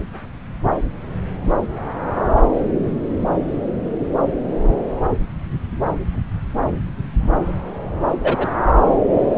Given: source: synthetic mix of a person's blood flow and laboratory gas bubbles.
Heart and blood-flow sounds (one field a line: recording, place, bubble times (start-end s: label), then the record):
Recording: Doppler ultrasound of blood flow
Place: subclavian vein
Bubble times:
8.23-8.46 s: bubbles
From the record:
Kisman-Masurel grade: 123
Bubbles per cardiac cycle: 1 to 2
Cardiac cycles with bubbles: 10 to 50%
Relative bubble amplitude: loud (0.450 to 0.775)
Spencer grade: 2 (many but less than half of the cardiac periods contain bubble signals, singularly or in groups)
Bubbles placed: anywhere in the cardiac cycle